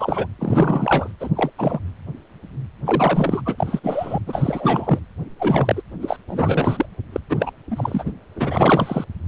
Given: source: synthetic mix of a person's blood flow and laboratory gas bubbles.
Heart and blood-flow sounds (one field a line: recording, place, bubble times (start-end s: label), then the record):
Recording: Doppler ultrasound of blood flow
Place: precordium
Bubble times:
0.00-0.27 s: bubbles
0.39-1.11 s: bubbles
1.20-1.29 s: bubbles
1.35-1.50 s: bubbles
1.58-1.80 s: bubbles
2.85-3.42 s: bubbles
3.45-3.79 s: bubbles
3.83-4.19 s: bubbles
4.26-4.99 s: bubbles
5.39-5.82 s: bubbles
6.01-6.17 s: bubbles
6.28-6.86 s: bubbles
7.12-7.20 s: bubbles
7.29-7.51 s: bubbles
7.71-8.12 s: bubbles
8.35-9.04 s: bubbles
From the record:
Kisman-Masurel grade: 333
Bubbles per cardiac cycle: rolling drumbeat, 9 or more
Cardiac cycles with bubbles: 50 to 99%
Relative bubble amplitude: loud (0.450 to 0.775)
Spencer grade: 3 (all of the cardiac periods contain showers or single bubble signals, but not dominating or overriding the cardiac motion signals)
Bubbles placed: anywhere in the cardiac cycle